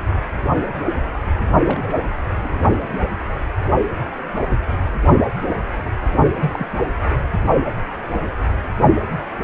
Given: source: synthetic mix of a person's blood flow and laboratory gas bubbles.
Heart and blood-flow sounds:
Doppler ultrasound of blood flow; precordium
1.63-2.06 s: bubbles
2.42-2.60 s: bubbles
6.41-6.67 s: bubbles
From the record:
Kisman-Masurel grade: 221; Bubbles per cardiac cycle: several, 3 to 8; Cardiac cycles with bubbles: 10 to 50%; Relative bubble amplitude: barely perceptible (0.100 to 0.250); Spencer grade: 2 (many but less than half of the cardiac periods contain bubble signals, singularly or in groups); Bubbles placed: only in the low amplitude regions of the cardiac cycle

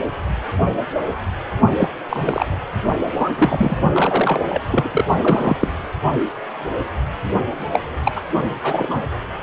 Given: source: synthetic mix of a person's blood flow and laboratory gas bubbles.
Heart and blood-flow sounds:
Doppler ultrasound of blood flow; precordium
1.77-1.89 s: bubbles
2.09-2.46 s: bubbles
3.16-3.29 s: bubbles
3.37-3.76 s: bubbles
3.92-4.45 s: bubbles
4.48-4.62 s: bubbles
4.71-5.04 s: bubbles
5.18-5.56 s: bubbles
5.62-5.68 s: bubbles
7.73-7.80 s: bubbles
8.04-8.12 s: bubbles
8.15-8.21 s: bubbles
8.63-9.00 s: bubbles
From the record:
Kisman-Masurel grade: 232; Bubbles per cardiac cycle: several, 3 to 8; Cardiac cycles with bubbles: 50 to 99%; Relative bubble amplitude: moderate (0.250 to 0.450); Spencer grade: 3 (all of the cardiac periods contain showers or single bubble signals, but not dominating or overriding the cardiac motion signals); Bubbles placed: only in the low amplitude regions of the cardiac cycle

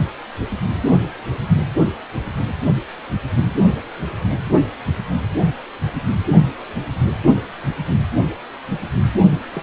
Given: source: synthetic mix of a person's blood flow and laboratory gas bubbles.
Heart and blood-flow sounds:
Doppler ultrasound of blood flow; precordium
9.53-9.63 s: bubbles
From the record:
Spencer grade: 1 (occasional bubble signal discernible with the cardiac motion signal, with majority of cardiac periods free of bubbles); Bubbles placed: anywhere in the cardiac cycle

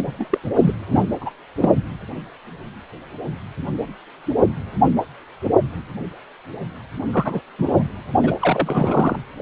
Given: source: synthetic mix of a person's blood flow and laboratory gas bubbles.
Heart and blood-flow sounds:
Doppler ultrasound of blood flow; precordium
0.00-0.38 s: bubbles
0.44-0.50 s: bubbles
0.55-0.75 s: bubbles
0.90-1.08 s: bubbles
1.21-1.30 s: bubbles
1.61-1.76 s: bubbles
7.13-7.40 s: bubbles
7.58-7.84 s: bubbles
8.23-8.34 s: bubbles
8.41-9.16 s: bubbles
9.36-9.42 s: bubbles
From the record:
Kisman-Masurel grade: 233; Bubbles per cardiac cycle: several, 3 to 8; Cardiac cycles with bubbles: 50 to 99%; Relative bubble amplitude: loud (0.450 to 0.775); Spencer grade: 3 (all of the cardiac periods contain showers or single bubble signals, but not dominating or overriding the cardiac motion signals); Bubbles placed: anywhere in the cardiac cycle

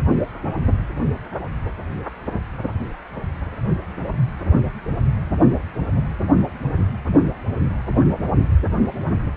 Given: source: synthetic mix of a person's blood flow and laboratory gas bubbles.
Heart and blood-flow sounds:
Doppler ultrasound of blood flow; precordium
no bubbles
From the record:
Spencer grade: 0 (complete lack of bubble signals)

